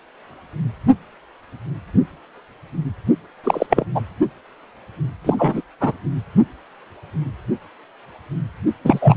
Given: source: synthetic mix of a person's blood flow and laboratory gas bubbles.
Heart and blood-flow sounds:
Doppler ultrasound of blood flow; precordium
3.44-3.66 s: bubbles
3.70-3.85 s: bubbles
3.95-4.01 s: bubbles
5.25-5.36 s: bubbles
5.38-5.61 s: bubbles
5.80-5.92 s: bubbles
8.84-9.17 s: bubbles
From the record:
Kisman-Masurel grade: 223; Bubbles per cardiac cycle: several, 3 to 8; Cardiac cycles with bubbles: 10 to 50%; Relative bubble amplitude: loud (0.450 to 0.775); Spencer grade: 2 (many but less than half of the cardiac periods contain bubble signals, singularly or in groups); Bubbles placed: only in the low amplitude regions of the cardiac cycle

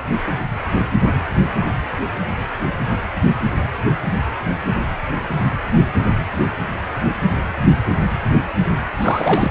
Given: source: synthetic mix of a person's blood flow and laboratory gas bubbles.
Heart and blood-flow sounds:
Doppler ultrasound of blood flow; precordium
8.96-9.51 s: bubbles
From the record:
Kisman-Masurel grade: 212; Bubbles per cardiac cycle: several, 3 to 8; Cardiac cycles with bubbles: 1 to 10%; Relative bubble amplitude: moderate (0.250 to 0.450); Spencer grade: 1 (occasional bubble signal discernible with the cardiac motion signal, with majority of cardiac periods free of bubbles); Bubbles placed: anywhere in the cardiac cycle

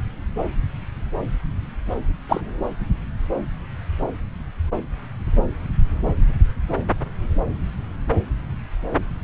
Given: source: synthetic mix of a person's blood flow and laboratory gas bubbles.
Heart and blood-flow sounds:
Doppler ultrasound of blood flow; subclavian vein
2.29-2.42 s: bubbles
From the record:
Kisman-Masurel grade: 113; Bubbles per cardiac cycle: 1 to 2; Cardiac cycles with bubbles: 1 to 10%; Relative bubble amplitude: loud (0.450 to 0.775); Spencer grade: 1 (occasional bubble signal discernible with the cardiac motion signal, with majority of cardiac periods free of bubbles); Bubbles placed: anywhere in the cardiac cycle

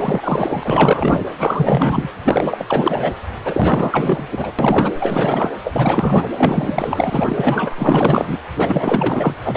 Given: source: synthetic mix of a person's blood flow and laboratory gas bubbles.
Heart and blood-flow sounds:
Doppler ultrasound of blood flow; precordium
0.00-1.20 s: bubbles
1.38-2.09 s: bubbles
2.24-2.66 s: bubbles
2.68-3.12 s: bubbles
3.45-4.52 s: bubbles
4.58-4.92 s: bubbles
5.00-5.51 s: bubbles
5.63-6.25 s: bubbles
6.36-8.40 s: bubbles
8.58-9.34 s: bubbles
9.45-9.57 s: bubbles
From the record:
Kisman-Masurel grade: 444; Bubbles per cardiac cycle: continuous sound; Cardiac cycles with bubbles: 100%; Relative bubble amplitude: maximal (0.775 to 0.999); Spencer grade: 4 (maximum detectable bubble signal sounding continuously throughout systole and diastole of every cardiac period, and overriding the amplitude of the normal cardiac signals); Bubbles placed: anywhere in the cardiac cycle

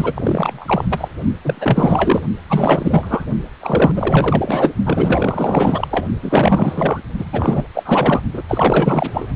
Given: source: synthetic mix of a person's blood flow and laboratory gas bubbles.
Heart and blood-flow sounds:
Doppler ultrasound of blood flow; precordium
0.00-0.85 s: bubbles
0.90-1.08 s: bubbles
1.45-2.21 s: bubbles
2.50-3.25 s: bubbles
3.60-3.92 s: bubbles
3.96-4.73 s: bubbles
4.85-5.88 s: bubbles
5.91-6.07 s: bubbles
6.22-7.02 s: bubbles
7.18-7.25 s: bubbles
7.33-7.67 s: bubbles
7.74-8.21 s: bubbles
8.33-8.42 s: bubbles
8.48-9.26 s: bubbles
From the record:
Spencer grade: 4 (maximum detectable bubble signal sounding continuously throughout systole and diastole of every cardiac period, and overriding the amplitude of the normal cardiac signals); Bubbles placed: only in the low amplitude regions of the cardiac cycle

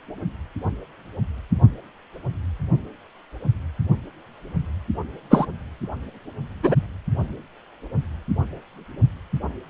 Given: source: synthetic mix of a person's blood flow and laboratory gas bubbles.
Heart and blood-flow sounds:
Doppler ultrasound of blood flow; precordium
5.31-5.47 s: bubbles
6.63-6.76 s: bubbles
From the record:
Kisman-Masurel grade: 113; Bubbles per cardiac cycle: 1 to 2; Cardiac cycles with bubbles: 1 to 10%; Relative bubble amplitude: loud (0.450 to 0.775); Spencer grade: 1 (occasional bubble signal discernible with the cardiac motion signal, with majority of cardiac periods free of bubbles); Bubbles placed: only in the low amplitude regions of the cardiac cycle

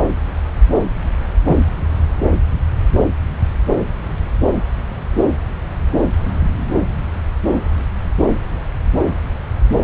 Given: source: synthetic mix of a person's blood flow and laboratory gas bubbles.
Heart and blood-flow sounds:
Doppler ultrasound of blood flow; subclavian vein
1.45-1.58 s: bubbles
From the record:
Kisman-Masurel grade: 112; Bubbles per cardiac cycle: 1 to 2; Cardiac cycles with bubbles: 1 to 10%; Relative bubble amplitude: moderate (0.250 to 0.450); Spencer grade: 1 (occasional bubble signal discernible with the cardiac motion signal, with majority of cardiac periods free of bubbles); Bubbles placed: anywhere in the cardiac cycle

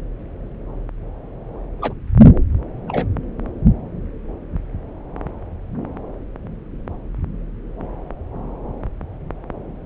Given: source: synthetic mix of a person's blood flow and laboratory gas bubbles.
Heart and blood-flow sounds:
Doppler ultrasound of blood flow; subclavian vein
1.80-1.93 s: bubbles
2.88-3.07 s: bubbles
From the record:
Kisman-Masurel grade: 112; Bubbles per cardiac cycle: 1 to 2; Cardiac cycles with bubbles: 1 to 10%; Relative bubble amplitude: moderate (0.250 to 0.450); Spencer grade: 1 (occasional bubble signal discernible with the cardiac motion signal, with majority of cardiac periods free of bubbles); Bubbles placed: anywhere in the cardiac cycle

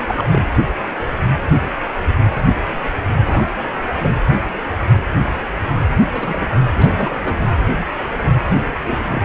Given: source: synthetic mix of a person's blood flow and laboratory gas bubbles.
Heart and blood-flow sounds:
Doppler ultrasound of blood flow; precordium
0.06-0.27 s: bubbles
0.31-0.47 s: bubbles
3.04-3.52 s: bubbles
3.97-4.12 s: bubbles
6.12-6.59 s: bubbles
6.75-7.46 s: bubbles
8.48-8.62 s: bubbles
8.71-9.06 s: bubbles
9.12-9.24 s: bubbles
From the record:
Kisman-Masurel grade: 232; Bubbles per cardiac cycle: several, 3 to 8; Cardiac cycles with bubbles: 50 to 99%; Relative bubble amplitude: moderate (0.250 to 0.450); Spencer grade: 3 (all of the cardiac periods contain showers or single bubble signals, but not dominating or overriding the cardiac motion signals); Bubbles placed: anywhere in the cardiac cycle

